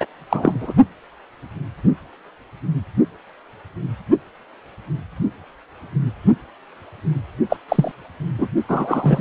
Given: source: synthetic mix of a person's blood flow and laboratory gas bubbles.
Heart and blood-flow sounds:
Doppler ultrasound of blood flow; precordium
0.00-0.06 s: bubbles
0.30-0.74 s: bubbles
7.49-7.56 s: bubbles
7.68-7.91 s: bubbles
8.38-8.47 s: bubbles
8.68-9.21 s: bubbles
From the record:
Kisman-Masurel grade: 223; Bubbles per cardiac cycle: several, 3 to 8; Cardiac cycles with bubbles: 10 to 50%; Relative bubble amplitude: loud (0.450 to 0.775); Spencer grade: 2 (many but less than half of the cardiac periods contain bubble signals, singularly or in groups); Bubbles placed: only in the low amplitude regions of the cardiac cycle

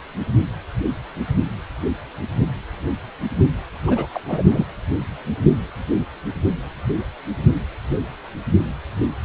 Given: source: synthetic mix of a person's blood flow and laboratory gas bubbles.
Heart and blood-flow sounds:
Doppler ultrasound of blood flow; precordium
3.85-4.08 s: bubbles
4.13-4.21 s: bubbles
4.28-4.43 s: bubbles
4.47-4.65 s: bubbles
From the record:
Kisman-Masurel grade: 212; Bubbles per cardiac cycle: several, 3 to 8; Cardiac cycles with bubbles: 1 to 10%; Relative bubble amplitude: moderate (0.250 to 0.450); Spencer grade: 1 (occasional bubble signal discernible with the cardiac motion signal, with majority of cardiac periods free of bubbles); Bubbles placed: anywhere in the cardiac cycle

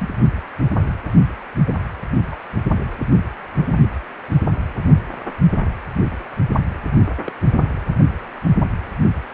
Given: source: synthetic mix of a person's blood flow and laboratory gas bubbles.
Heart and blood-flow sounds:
Doppler ultrasound of blood flow; precordium
0.00-0.09 s: bubbles
1.67-1.72 s: bubbles
2.31-2.36 s: bubbles
7.24-7.32 s: bubbles
From the record:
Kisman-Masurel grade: 121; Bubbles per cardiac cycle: 1 to 2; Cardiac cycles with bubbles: 10 to 50%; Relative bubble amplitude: barely perceptible (0.100 to 0.250); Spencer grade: 2 (many but less than half of the cardiac periods contain bubble signals, singularly or in groups); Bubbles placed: only in the low amplitude regions of the cardiac cycle

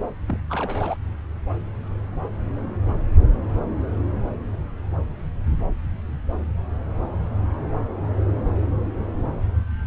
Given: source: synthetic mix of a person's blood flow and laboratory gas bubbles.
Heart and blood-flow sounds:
Doppler ultrasound of blood flow; subclavian vein
0.28-0.36 s: bubbles
0.49-0.97 s: bubbles
From the record:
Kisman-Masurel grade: 211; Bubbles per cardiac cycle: several, 3 to 8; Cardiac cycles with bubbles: 1 to 10%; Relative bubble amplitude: barely perceptible (0.100 to 0.250); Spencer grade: 1 (occasional bubble signal discernible with the cardiac motion signal, with majority of cardiac periods free of bubbles); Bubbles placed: anywhere in the cardiac cycle

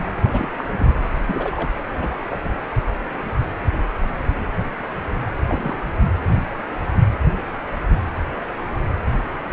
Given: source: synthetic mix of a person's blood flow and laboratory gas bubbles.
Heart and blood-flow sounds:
Doppler ultrasound of blood flow; precordium
0.21-0.48 s: bubbles
0.58-0.64 s: bubbles
0.77-0.91 s: bubbles
1.27-1.72 s: bubbles
1.98-2.18 s: bubbles
2.22-2.39 s: bubbles
5.48-5.75 s: bubbles
From the record:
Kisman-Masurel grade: 221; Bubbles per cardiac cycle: several, 3 to 8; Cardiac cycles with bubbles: 10 to 50%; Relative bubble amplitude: barely perceptible (0.100 to 0.250); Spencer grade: 2 (many but less than half of the cardiac periods contain bubble signals, singularly or in groups); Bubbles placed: anywhere in the cardiac cycle

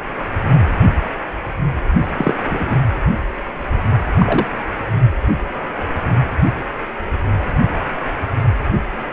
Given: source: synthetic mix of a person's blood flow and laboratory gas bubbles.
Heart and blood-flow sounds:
Doppler ultrasound of blood flow; precordium
2.17-2.34 s: bubbles
2.48-2.76 s: bubbles
4.19-4.46 s: bubbles
From the record:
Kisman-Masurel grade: 123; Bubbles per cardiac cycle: 1 to 2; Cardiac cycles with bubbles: 10 to 50%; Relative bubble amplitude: loud (0.450 to 0.775); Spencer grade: 2 (many but less than half of the cardiac periods contain bubble signals, singularly or in groups); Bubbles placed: anywhere in the cardiac cycle

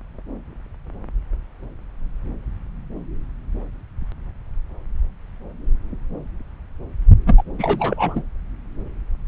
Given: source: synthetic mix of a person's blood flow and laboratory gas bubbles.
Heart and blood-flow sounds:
Doppler ultrasound of blood flow; subclavian vein
7.26-7.42 s: bubbles
7.58-8.22 s: bubbles
From the record:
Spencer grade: 1 (occasional bubble signal discernible with the cardiac motion signal, with majority of cardiac periods free of bubbles); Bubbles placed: anywhere in the cardiac cycle

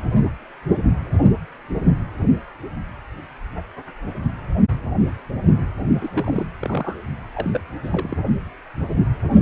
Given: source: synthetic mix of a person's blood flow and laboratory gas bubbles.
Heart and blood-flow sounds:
Doppler ultrasound of blood flow; precordium
6.01-6.46 s: bubbles
6.59-7.04 s: bubbles
7.34-7.50 s: bubbles
7.54-7.61 s: bubbles
7.83-8.16 s: bubbles
From the record:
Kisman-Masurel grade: 221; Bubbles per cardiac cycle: several, 3 to 8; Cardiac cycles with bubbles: 10 to 50%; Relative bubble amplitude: barely perceptible (0.100 to 0.250); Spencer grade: 2 (many but less than half of the cardiac periods contain bubble signals, singularly or in groups); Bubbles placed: only in the low amplitude regions of the cardiac cycle

